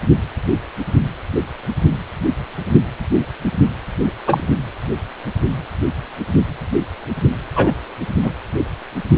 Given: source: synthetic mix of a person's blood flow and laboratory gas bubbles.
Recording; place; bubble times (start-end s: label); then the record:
Doppler ultrasound of blood flow; precordium
4.26-4.43 s: bubbles
7.55-7.74 s: bubbles
8.23-8.31 s: bubbles
From the record:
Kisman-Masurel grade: 123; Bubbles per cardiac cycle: 1 to 2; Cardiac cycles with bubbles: 10 to 50%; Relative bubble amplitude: loud (0.450 to 0.775); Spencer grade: 2 (many but less than half of the cardiac periods contain bubble signals, singularly or in groups); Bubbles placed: anywhere in the cardiac cycle